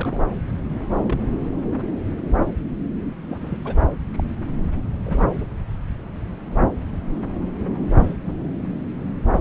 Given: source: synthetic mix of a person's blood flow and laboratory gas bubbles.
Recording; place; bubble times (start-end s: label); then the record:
Doppler ultrasound of blood flow; subclavian vein
0.00-0.20 s: bubbles
1.02-1.18 s: bubbles
3.29-3.38 s: bubbles
3.41-3.56 s: bubbles
3.64-3.76 s: bubbles
4.12-4.24 s: bubbles
5.06-5.26 s: bubbles
5.38-5.45 s: bubbles
8.00-8.14 s: bubbles
8.25-8.34 s: bubbles
From the record:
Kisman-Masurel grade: 121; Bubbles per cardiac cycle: 1 to 2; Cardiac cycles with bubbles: 10 to 50%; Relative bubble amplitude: barely perceptible (0.100 to 0.250); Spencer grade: 2 (many but less than half of the cardiac periods contain bubble signals, singularly or in groups); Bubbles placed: anywhere in the cardiac cycle